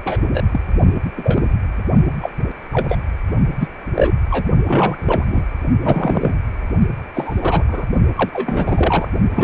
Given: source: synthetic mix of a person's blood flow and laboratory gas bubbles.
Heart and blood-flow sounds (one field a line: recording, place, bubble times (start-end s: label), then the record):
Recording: Doppler ultrasound of blood flow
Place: precordium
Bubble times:
0.04-0.20 s: bubbles
0.32-0.43 s: bubbles
0.51-0.60 s: bubbles
1.17-1.48 s: bubbles
2.21-2.30 s: bubbles
2.71-2.98 s: bubbles
3.60-3.69 s: bubbles
3.94-4.12 s: bubbles
4.30-4.48 s: bubbles
4.66-4.96 s: bubbles
4.99-5.46 s: bubbles
5.81-6.34 s: bubbles
7.14-7.64 s: bubbles
7.68-7.85 s: bubbles
8.15-8.29 s: bubbles
8.33-9.08 s: bubbles
9.30-9.44 s: bubbles
From the record:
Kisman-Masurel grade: 243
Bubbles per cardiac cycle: several, 3 to 8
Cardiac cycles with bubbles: 100%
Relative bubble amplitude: loud (0.450 to 0.775)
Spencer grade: 3 (all of the cardiac periods contain showers or single bubble signals, but not dominating or overriding the cardiac motion signals)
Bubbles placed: only in the low amplitude regions of the cardiac cycle